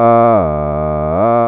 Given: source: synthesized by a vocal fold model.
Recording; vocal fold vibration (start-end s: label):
sustained vowel that changes in the middle
0.00-0.29 s: 116.9 Hz, open quotient 0.33
0.49-1.09 s: 75.8 Hz, open quotient 0.37
1.29-1.48 s: 116.9 Hz, open quotient 0.33